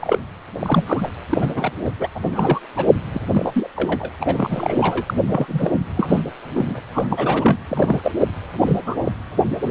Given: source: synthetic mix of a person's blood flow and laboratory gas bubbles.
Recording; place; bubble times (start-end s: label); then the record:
Doppler ultrasound of blood flow; precordium
0.00-0.17 s: bubbles
0.61-0.83 s: bubbles
0.86-1.10 s: bubbles
1.29-1.71 s: bubbles
1.84-1.91 s: bubbles
1.99-2.08 s: bubbles
2.15-2.19 s: bubbles
2.23-2.59 s: bubbles
2.76-2.86 s: bubbles
3.13-3.20 s: bubbles
3.33-3.70 s: bubbles
3.76-4.11 s: bubbles
4.20-5.14 s: bubbles
5.28-5.71 s: bubbles
5.96-6.21 s: bubbles
6.54-6.80 s: bubbles
6.92-7.57 s: bubbles
7.68-8.01 s: bubbles
8.03-8.12 s: bubbles
8.19-8.26 s: bubbles
8.62-8.81 s: bubbles
8.86-8.96 s: bubbles
9.04-9.12 s: bubbles
9.61-9.71 s: bubbles
From the record:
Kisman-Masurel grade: 242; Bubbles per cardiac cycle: several, 3 to 8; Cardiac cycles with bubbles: 100%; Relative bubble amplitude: moderate (0.250 to 0.450); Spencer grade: 3 (all of the cardiac periods contain showers or single bubble signals, but not dominating or overriding the cardiac motion signals); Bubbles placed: anywhere in the cardiac cycle